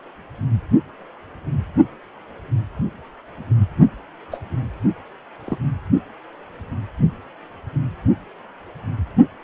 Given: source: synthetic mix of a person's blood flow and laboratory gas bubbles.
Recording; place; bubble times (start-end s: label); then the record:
Doppler ultrasound of blood flow; precordium
4.32-4.38 s: bubbles
5.46-5.58 s: bubbles
From the record:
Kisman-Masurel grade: 122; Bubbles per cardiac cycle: 1 to 2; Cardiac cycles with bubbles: 10 to 50%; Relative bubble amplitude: moderate (0.250 to 0.450); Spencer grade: 2 (many but less than half of the cardiac periods contain bubble signals, singularly or in groups); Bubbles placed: only in the low amplitude regions of the cardiac cycle